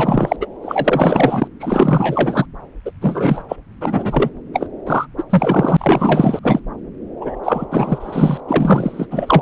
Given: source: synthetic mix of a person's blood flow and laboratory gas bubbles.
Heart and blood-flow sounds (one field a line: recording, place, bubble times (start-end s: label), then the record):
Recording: Doppler ultrasound of blood flow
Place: subclavian vein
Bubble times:
0.00-0.36 s: bubbles
0.40-0.47 s: bubbles
0.62-1.47 s: bubbles
1.59-2.46 s: bubbles
2.85-2.91 s: bubbles
3.01-3.43 s: bubbles
3.49-3.57 s: bubbles
3.81-4.30 s: bubbles
4.53-4.67 s: bubbles
4.86-5.07 s: bubbles
5.17-5.24 s: bubbles
5.29-6.39 s: bubbles
6.42-6.61 s: bubbles
7.21-7.36 s: bubbles
7.43-7.65 s: bubbles
7.71-8.40 s: bubbles
8.47-9.07 s: bubbles
9.10-9.42 s: bubbles
From the record:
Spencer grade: 4 (maximum detectable bubble signal sounding continuously throughout systole and diastole of every cardiac period, and overriding the amplitude of the normal cardiac signals)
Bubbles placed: anywhere in the cardiac cycle